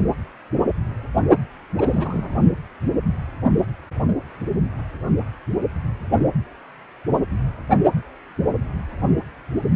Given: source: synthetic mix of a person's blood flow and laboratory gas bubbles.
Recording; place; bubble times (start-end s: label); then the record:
Doppler ultrasound of blood flow; precordium
1.77-2.38 s: bubbles
From the record:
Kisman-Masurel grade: 211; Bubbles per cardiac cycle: several, 3 to 8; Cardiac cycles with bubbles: 1 to 10%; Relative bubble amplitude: barely perceptible (0.100 to 0.250); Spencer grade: 1 (occasional bubble signal discernible with the cardiac motion signal, with majority of cardiac periods free of bubbles); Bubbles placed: only in the low amplitude regions of the cardiac cycle